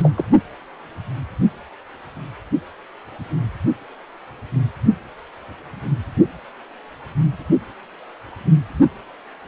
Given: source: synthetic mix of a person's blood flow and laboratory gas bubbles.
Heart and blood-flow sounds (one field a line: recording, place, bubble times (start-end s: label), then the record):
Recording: Doppler ultrasound of blood flow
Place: precordium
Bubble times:
0.00-0.12 s: bubbles
0.17-0.24 s: bubbles
From the record:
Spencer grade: 1 (occasional bubble signal discernible with the cardiac motion signal, with majority of cardiac periods free of bubbles)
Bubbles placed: only in the low amplitude regions of the cardiac cycle